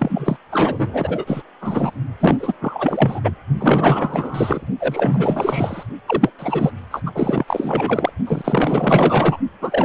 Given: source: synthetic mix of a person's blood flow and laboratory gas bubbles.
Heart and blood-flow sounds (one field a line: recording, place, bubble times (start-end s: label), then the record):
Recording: Doppler ultrasound of blood flow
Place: precordium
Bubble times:
0.00-0.36 s: bubbles
0.52-1.42 s: bubbles
1.60-1.92 s: bubbles
2.20-2.54 s: bubbles
2.61-3.21 s: bubbles
3.24-3.35 s: bubbles
3.59-4.67 s: bubbles
4.79-5.83 s: bubbles
6.07-6.30 s: bubbles
6.38-6.71 s: bubbles
6.90-7.01 s: bubbles
7.06-7.12 s: bubbles
7.14-7.44 s: bubbles
7.47-8.11 s: bubbles
8.27-9.38 s: bubbles
9.61-9.85 s: bubbles
From the record:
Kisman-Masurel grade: 444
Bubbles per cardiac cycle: continuous sound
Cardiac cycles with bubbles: 100%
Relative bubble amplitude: maximal (0.775 to 0.999)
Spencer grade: 4 (maximum detectable bubble signal sounding continuously throughout systole and diastole of every cardiac period, and overriding the amplitude of the normal cardiac signals)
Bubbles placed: only in the low amplitude regions of the cardiac cycle